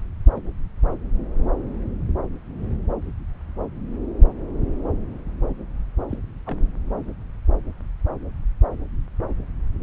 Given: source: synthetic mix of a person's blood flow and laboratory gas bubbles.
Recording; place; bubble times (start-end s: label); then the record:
Doppler ultrasound of blood flow; subclavian vein
0.35-0.40 s: bubbles
6.10-6.17 s: bubbles
6.46-6.56 s: bubbles
From the record:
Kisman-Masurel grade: 121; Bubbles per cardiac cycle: 1 to 2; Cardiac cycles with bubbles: 10 to 50%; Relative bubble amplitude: barely perceptible (0.100 to 0.250); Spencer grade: 2 (many but less than half of the cardiac periods contain bubble signals, singularly or in groups); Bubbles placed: anywhere in the cardiac cycle